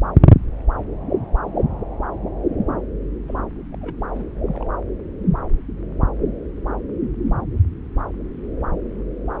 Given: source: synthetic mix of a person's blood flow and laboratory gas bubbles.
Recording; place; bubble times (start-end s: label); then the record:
Doppler ultrasound of blood flow; subclavian vein
3.28-3.42 s: bubbles
3.72-3.77 s: bubbles
3.81-3.95 s: bubbles
3.98-4.38 s: bubbles
4.48-4.51 s: bubbles
4.55-4.66 s: bubbles
From the record:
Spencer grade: 1 (occasional bubble signal discernible with the cardiac motion signal, with majority of cardiac periods free of bubbles); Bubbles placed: anywhere in the cardiac cycle